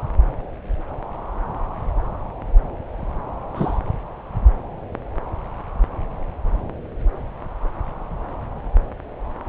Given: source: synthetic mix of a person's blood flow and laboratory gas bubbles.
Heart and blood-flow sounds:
Doppler ultrasound of blood flow; subclavian vein
3.55-3.80 s: bubbles
From the record:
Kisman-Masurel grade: 113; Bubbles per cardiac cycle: 1 to 2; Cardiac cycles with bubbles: 1 to 10%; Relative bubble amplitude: loud (0.450 to 0.775); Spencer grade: 1 (occasional bubble signal discernible with the cardiac motion signal, with majority of cardiac periods free of bubbles); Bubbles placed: anywhere in the cardiac cycle

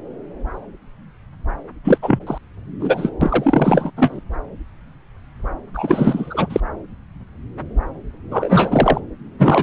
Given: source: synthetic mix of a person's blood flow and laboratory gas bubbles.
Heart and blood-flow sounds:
Doppler ultrasound of blood flow; subclavian vein
1.84-1.98 s: bubbles
2.02-2.19 s: bubbles
2.26-2.38 s: bubbles
2.79-3.10 s: bubbles
3.21-3.91 s: bubbles
3.97-4.21 s: bubbles
5.74-6.61 s: bubbles
8.31-9.00 s: bubbles
9.39-9.63 s: bubbles
From the record:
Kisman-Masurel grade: 333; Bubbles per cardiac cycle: rolling drumbeat, 9 or more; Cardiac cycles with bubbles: 50 to 99%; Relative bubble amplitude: loud (0.450 to 0.775); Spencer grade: 3 (all of the cardiac periods contain showers or single bubble signals, but not dominating or overriding the cardiac motion signals); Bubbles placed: anywhere in the cardiac cycle

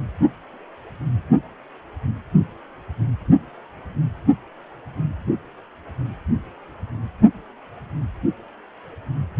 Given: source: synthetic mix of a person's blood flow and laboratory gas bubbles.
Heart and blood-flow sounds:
Doppler ultrasound of blood flow; precordium
no bubbles
From the record:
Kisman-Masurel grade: 000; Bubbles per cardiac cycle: 0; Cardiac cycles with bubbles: 0%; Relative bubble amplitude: no bubbles discernible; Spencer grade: 0 (complete lack of bubble signals)

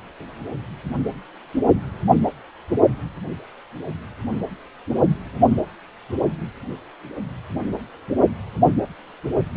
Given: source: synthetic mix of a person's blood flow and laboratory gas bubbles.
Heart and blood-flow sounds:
Doppler ultrasound of blood flow; precordium
no bubbles
From the record:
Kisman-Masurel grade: 000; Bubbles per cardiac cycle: 0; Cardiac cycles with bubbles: 0%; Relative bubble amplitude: no bubbles discernible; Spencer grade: 0 (complete lack of bubble signals)

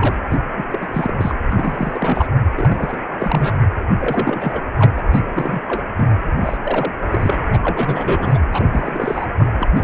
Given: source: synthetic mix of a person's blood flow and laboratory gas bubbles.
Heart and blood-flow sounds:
Doppler ultrasound of blood flow; precordium
0.00-0.16 s: bubbles
0.28-0.40 s: bubbles
0.56-0.65 s: bubbles
0.70-0.78 s: bubbles
0.81-1.35 s: bubbles
1.49-2.28 s: bubbles
2.57-2.98 s: bubbles
3.18-3.57 s: bubbles
4.00-4.62 s: bubbles
4.78-5.03 s: bubbles
5.09-5.28 s: bubbles
5.35-5.60 s: bubbles
5.67-5.85 s: bubbles
5.97-6.08 s: bubbles
6.40-6.58 s: bubbles
6.63-6.93 s: bubbles
7.10-7.37 s: bubbles
7.53-7.59 s: bubbles
7.63-8.40 s: bubbles
8.52-9.28 s: bubbles
9.38-9.49 s: bubbles
9.59-9.70 s: bubbles
9.76-9.84 s: bubbles
From the record:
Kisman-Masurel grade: 342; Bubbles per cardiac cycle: rolling drumbeat, 9 or more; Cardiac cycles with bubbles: 100%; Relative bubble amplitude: moderate (0.250 to 0.450); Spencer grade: 3 (all of the cardiac periods contain showers or single bubble signals, but not dominating or overriding the cardiac motion signals); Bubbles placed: anywhere in the cardiac cycle

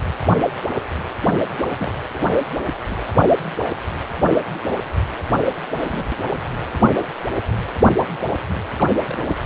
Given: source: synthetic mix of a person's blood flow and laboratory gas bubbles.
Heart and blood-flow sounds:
Doppler ultrasound of blood flow; precordium
1.78-1.91 s: bubbles
2.13-2.19 s: bubbles
2.88-3.14 s: bubbles
5.81-6.06 s: bubbles
6.99-7.07 s: bubbles
8.78-8.90 s: bubbles
9.05-9.21 s: bubbles
From the record:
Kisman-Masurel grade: 121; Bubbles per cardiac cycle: 1 to 2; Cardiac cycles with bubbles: 10 to 50%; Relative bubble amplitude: barely perceptible (0.100 to 0.250); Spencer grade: 2 (many but less than half of the cardiac periods contain bubble signals, singularly or in groups); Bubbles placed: anywhere in the cardiac cycle

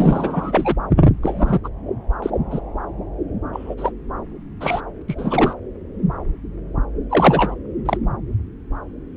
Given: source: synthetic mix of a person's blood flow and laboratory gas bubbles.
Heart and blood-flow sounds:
Doppler ultrasound of blood flow; subclavian vein
0.00-0.75 s: bubbles
1.22-1.59 s: bubbles
1.64-1.68 s: bubbles
2.22-2.30 s: bubbles
2.51-2.60 s: bubbles
3.53-3.75 s: bubbles
3.78-3.92 s: bubbles
4.61-4.80 s: bubbles
5.08-5.15 s: bubbles
5.17-5.54 s: bubbles
7.09-7.54 s: bubbles
7.85-7.97 s: bubbles
From the record:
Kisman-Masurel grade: 232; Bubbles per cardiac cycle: several, 3 to 8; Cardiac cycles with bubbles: 50 to 99%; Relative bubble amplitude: moderate (0.250 to 0.450); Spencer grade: 3 (all of the cardiac periods contain showers or single bubble signals, but not dominating or overriding the cardiac motion signals); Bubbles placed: anywhere in the cardiac cycle

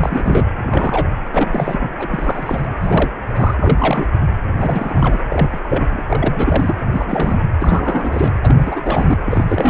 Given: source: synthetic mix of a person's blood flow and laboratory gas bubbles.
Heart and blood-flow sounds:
Doppler ultrasound of blood flow; precordium
0.00-0.48 s: bubbles
0.57-1.11 s: bubbles
1.32-1.90 s: bubbles
1.99-2.67 s: bubbles
2.81-3.11 s: bubbles
3.35-3.54 s: bubbles
3.57-4.10 s: bubbles
4.59-5.20 s: bubbles
5.30-5.60 s: bubbles
5.63-6.03 s: bubbles
6.07-6.75 s: bubbles
6.91-7.41 s: bubbles
7.60-8.37 s: bubbles
8.42-9.21 s: bubbles
9.26-9.70 s: bubbles
From the record:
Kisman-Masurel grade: 342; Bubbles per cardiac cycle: rolling drumbeat, 9 or more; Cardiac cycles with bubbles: 100%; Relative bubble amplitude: moderate (0.250 to 0.450); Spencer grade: 3 (all of the cardiac periods contain showers or single bubble signals, but not dominating or overriding the cardiac motion signals); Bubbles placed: anywhere in the cardiac cycle

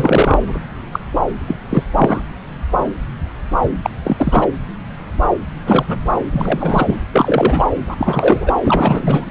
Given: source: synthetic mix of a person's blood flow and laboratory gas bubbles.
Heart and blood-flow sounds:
Doppler ultrasound of blood flow; subclavian vein
0.00-0.60 s: bubbles
0.92-0.99 s: bubbles
1.47-1.56 s: bubbles
1.69-1.83 s: bubbles
1.92-2.23 s: bubbles
3.83-3.90 s: bubbles
4.04-4.47 s: bubbles
5.66-5.99 s: bubbles
6.09-6.14 s: bubbles
6.33-6.98 s: bubbles
7.12-7.65 s: bubbles
7.87-8.52 s: bubbles
8.63-9.24 s: bubbles
From the record:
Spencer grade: 3 (all of the cardiac periods contain showers or single bubble signals, but not dominating or overriding the cardiac motion signals); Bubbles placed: anywhere in the cardiac cycle

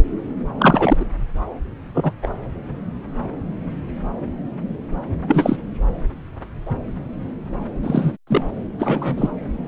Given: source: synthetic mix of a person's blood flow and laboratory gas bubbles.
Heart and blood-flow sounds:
Doppler ultrasound of blood flow; subclavian vein
0.58-1.05 s: bubbles
1.94-2.12 s: bubbles
2.22-2.29 s: bubbles
5.27-5.57 s: bubbles
7.83-8.12 s: bubbles
8.27-8.41 s: bubbles
8.79-9.32 s: bubbles
From the record:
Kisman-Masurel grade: 223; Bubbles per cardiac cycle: several, 3 to 8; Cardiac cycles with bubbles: 10 to 50%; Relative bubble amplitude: loud (0.450 to 0.775); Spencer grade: 2 (many but less than half of the cardiac periods contain bubble signals, singularly or in groups); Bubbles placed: anywhere in the cardiac cycle

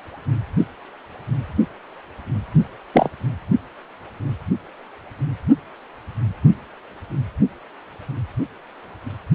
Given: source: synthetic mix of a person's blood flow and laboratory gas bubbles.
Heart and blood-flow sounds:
Doppler ultrasound of blood flow; precordium
2.93-3.09 s: bubbles
From the record:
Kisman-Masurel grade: 113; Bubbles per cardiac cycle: 1 to 2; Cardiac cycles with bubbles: 1 to 10%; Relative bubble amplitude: loud (0.450 to 0.775); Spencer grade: 1 (occasional bubble signal discernible with the cardiac motion signal, with majority of cardiac periods free of bubbles); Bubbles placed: only in the low amplitude regions of the cardiac cycle

